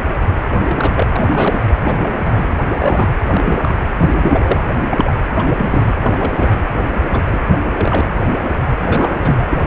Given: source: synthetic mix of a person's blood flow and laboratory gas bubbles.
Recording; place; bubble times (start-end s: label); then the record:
Doppler ultrasound of blood flow; precordium
0.00-0.04 s: bubbles
0.66-1.07 s: bubbles
1.12-1.75 s: bubbles
1.84-2.54 s: bubbles
2.72-3.11 s: bubbles
3.30-3.81 s: bubbles
3.98-4.57 s: bubbles
4.91-5.12 s: bubbles
5.36-5.48 s: bubbles
5.58-5.94 s: bubbles
6.04-6.63 s: bubbles
7.10-7.23 s: bubbles
7.31-7.40 s: bubbles
7.51-7.61 s: bubbles
7.65-7.71 s: bubbles
7.77-8.06 s: bubbles
8.35-8.53 s: bubbles
8.78-9.46 s: bubbles
9.51-9.66 s: bubbles
From the record:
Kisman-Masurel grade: 232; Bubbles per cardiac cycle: several, 3 to 8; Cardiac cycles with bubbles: 50 to 99%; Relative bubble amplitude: moderate (0.250 to 0.450); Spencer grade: 3 (all of the cardiac periods contain showers or single bubble signals, but not dominating or overriding the cardiac motion signals); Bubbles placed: anywhere in the cardiac cycle